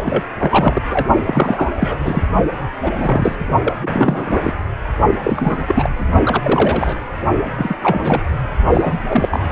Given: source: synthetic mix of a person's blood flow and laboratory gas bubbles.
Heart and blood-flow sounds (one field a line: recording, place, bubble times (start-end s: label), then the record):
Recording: Doppler ultrasound of blood flow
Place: precordium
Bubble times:
0.04-0.23 s: bubbles
0.40-0.82 s: bubbles
0.91-1.06 s: bubbles
1.24-1.69 s: bubbles
1.76-1.99 s: bubbles
2.03-2.26 s: bubbles
2.79-2.90 s: bubbles
2.95-3.36 s: bubbles
3.64-3.76 s: bubbles
3.81-4.54 s: bubbles
5.22-5.89 s: bubbles
5.97-6.04 s: bubbles
6.23-6.96 s: bubbles
7.56-7.77 s: bubbles
7.82-8.23 s: bubbles
8.71-8.98 s: bubbles
9.10-9.40 s: bubbles
From the record:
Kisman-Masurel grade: 342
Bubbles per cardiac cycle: rolling drumbeat, 9 or more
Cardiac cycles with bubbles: 100%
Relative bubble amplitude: moderate (0.250 to 0.450)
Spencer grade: 3 (all of the cardiac periods contain showers or single bubble signals, but not dominating or overriding the cardiac motion signals)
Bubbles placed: only in the low amplitude regions of the cardiac cycle